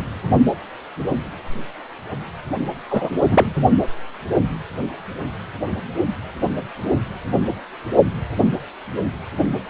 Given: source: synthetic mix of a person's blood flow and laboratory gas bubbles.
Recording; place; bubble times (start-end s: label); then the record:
Doppler ultrasound of blood flow; precordium
2.90-3.10 s: bubbles
3.23-3.55 s: bubbles
From the record:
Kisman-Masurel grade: 213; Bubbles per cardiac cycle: several, 3 to 8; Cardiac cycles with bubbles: 1 to 10%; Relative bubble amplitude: loud (0.450 to 0.775); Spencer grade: 1 (occasional bubble signal discernible with the cardiac motion signal, with majority of cardiac periods free of bubbles); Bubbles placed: anywhere in the cardiac cycle